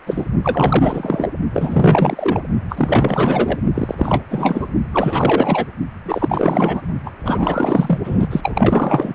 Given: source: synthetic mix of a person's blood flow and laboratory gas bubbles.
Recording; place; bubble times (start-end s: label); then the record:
Doppler ultrasound of blood flow; precordium
0.06-0.28 s: bubbles
0.44-1.29 s: bubbles
1.53-2.42 s: bubbles
2.69-3.58 s: bubbles
3.74-4.24 s: bubbles
4.29-4.67 s: bubbles
4.93-5.66 s: bubbles
6.05-6.81 s: bubbles
7.05-7.11 s: bubbles
7.25-7.98 s: bubbles
8.04-9.15 s: bubbles
From the record:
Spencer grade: 4 (maximum detectable bubble signal sounding continuously throughout systole and diastole of every cardiac period, and overriding the amplitude of the normal cardiac signals); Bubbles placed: only in the low amplitude regions of the cardiac cycle